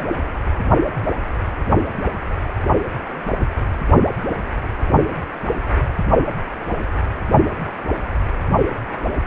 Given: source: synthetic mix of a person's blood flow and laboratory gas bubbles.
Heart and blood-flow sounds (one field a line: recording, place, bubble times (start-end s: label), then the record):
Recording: Doppler ultrasound of blood flow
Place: precordium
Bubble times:
no bubbles
From the record:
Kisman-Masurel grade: 000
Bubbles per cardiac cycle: 0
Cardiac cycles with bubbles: 0%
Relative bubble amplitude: no bubbles discernible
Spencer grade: 0 (complete lack of bubble signals)